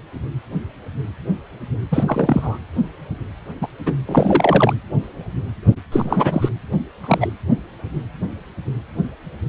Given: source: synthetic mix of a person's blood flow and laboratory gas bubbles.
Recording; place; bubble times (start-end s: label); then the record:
Doppler ultrasound of blood flow; precordium
1.91-2.57 s: bubbles
3.61-3.67 s: bubbles
3.85-3.94 s: bubbles
4.05-4.74 s: bubbles
5.92-6.50 s: bubbles
7.00-7.33 s: bubbles
From the record:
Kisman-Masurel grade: 223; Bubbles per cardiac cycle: several, 3 to 8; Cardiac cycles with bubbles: 10 to 50%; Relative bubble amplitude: loud (0.450 to 0.775); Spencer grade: 2 (many but less than half of the cardiac periods contain bubble signals, singularly or in groups); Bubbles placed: anywhere in the cardiac cycle